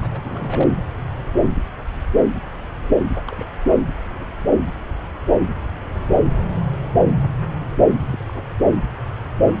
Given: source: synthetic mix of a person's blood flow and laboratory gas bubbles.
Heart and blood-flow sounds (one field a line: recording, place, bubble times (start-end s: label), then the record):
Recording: Doppler ultrasound of blood flow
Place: subclavian vein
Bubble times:
0.00-0.21 s: bubbles
0.25-0.70 s: bubbles
3.27-3.34 s: bubbles
3.36-3.51 s: bubbles
7.98-8.17 s: bubbles
8.27-8.39 s: bubbles
9.47-9.56 s: bubbles
From the record:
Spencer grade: 2 (many but less than half of the cardiac periods contain bubble signals, singularly or in groups)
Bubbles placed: anywhere in the cardiac cycle